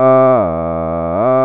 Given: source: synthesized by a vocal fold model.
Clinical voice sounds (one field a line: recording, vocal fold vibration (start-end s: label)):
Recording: sustained vowel that changes in the middle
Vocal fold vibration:
0.00-0.30 s: 130.4 Hz, open quotient 0.34
0.50-1.10 s: 82.4 Hz, open quotient 0.30
1.30-1.45 s: 130.4 Hz, open quotient 0.34